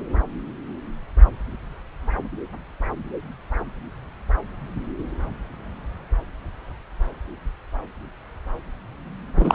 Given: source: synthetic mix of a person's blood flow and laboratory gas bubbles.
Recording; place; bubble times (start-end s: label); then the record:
Doppler ultrasound of blood flow; subclavian vein
9.37-9.55 s: bubbles
From the record:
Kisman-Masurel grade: 213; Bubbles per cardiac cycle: several, 3 to 8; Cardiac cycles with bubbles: 1 to 10%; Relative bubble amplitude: loud (0.450 to 0.775); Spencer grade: 1 (occasional bubble signal discernible with the cardiac motion signal, with majority of cardiac periods free of bubbles); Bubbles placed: anywhere in the cardiac cycle